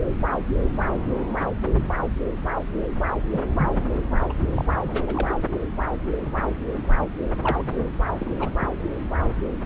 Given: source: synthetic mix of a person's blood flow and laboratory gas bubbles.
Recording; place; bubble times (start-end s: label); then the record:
Doppler ultrasound of blood flow; subclavian vein
3.32-3.41 s: bubbles
3.57-3.75 s: bubbles
3.94-4.01 s: bubbles
4.20-4.25 s: bubbles
4.29-4.33 s: bubbles
4.52-4.72 s: bubbles
4.83-5.35 s: bubbles
7.44-7.85 s: bubbles
8.20-8.35 s: bubbles
8.39-8.49 s: bubbles
8.60-8.68 s: bubbles
From the record:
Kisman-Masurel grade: 221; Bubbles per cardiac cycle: several, 3 to 8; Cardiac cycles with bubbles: 10 to 50%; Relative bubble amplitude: barely perceptible (0.100 to 0.250); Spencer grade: 2 (many but less than half of the cardiac periods contain bubble signals, singularly or in groups); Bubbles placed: anywhere in the cardiac cycle